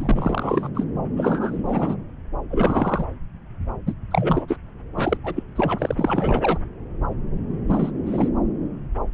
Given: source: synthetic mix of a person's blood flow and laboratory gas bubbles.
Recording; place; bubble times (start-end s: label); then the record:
Doppler ultrasound of blood flow; subclavian vein
0.00-0.68 s: bubbles
0.74-0.84 s: bubbles
1.17-1.62 s: bubbles
1.66-1.97 s: bubbles
2.50-3.04 s: bubbles
3.86-3.94 s: bubbles
4.11-4.46 s: bubbles
4.48-4.56 s: bubbles
4.96-5.17 s: bubbles
5.24-5.42 s: bubbles
5.55-6.58 s: bubbles
7.67-7.91 s: bubbles
8.06-8.28 s: bubbles
From the record:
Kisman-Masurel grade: 332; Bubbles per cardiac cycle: rolling drumbeat, 9 or more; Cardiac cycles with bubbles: 50 to 99%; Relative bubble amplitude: moderate (0.250 to 0.450); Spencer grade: 3 (all of the cardiac periods contain showers or single bubble signals, but not dominating or overriding the cardiac motion signals); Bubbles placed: anywhere in the cardiac cycle